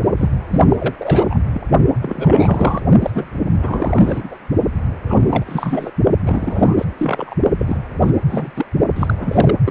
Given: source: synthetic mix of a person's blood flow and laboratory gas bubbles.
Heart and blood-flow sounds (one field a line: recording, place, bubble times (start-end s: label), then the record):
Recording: Doppler ultrasound of blood flow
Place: precordium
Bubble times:
0.18-0.29 s: bubbles
0.49-0.64 s: bubbles
0.69-0.93 s: bubbles
0.98-1.39 s: bubbles
1.51-1.61 s: bubbles
2.02-2.81 s: bubbles
3.02-3.10 s: bubbles
3.14-3.25 s: bubbles
3.60-4.36 s: bubbles
5.06-5.92 s: bubbles
6.24-6.75 s: bubbles
6.78-6.85 s: bubbles
6.97-7.34 s: bubbles
7.58-7.77 s: bubbles
8.00-8.11 s: bubbles
8.26-8.50 s: bubbles
8.55-8.66 s: bubbles
8.95-9.56 s: bubbles
9.65-9.71 s: bubbles
From the record:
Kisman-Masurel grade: 343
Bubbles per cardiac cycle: rolling drumbeat, 9 or more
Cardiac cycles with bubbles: 100%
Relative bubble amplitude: loud (0.450 to 0.775)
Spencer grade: 3 (all of the cardiac periods contain showers or single bubble signals, but not dominating or overriding the cardiac motion signals)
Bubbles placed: only in the low amplitude regions of the cardiac cycle